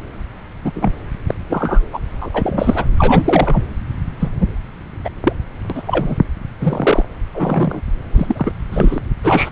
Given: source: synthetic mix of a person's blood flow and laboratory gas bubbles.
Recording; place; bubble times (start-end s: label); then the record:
Doppler ultrasound of blood flow; subclavian vein
0.65-0.71 s: bubbles
0.74-0.91 s: bubbles
1.27-1.34 s: bubbles
1.50-1.89 s: bubbles
1.92-1.99 s: bubbles
2.19-2.30 s: bubbles
2.33-2.85 s: bubbles
2.98-3.63 s: bubbles
4.20-4.31 s: bubbles
4.41-4.46 s: bubbles
5.04-5.09 s: bubbles
5.23-5.33 s: bubbles
5.70-5.83 s: bubbles
5.86-6.16 s: bubbles
6.60-7.05 s: bubbles
7.33-7.80 s: bubbles
8.11-8.51 s: bubbles
8.71-9.00 s: bubbles
9.23-9.50 s: bubbles
From the record:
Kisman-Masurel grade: 243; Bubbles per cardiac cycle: several, 3 to 8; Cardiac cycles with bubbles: 100%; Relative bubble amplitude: loud (0.450 to 0.775); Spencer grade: 3 (all of the cardiac periods contain showers or single bubble signals, but not dominating or overriding the cardiac motion signals); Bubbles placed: anywhere in the cardiac cycle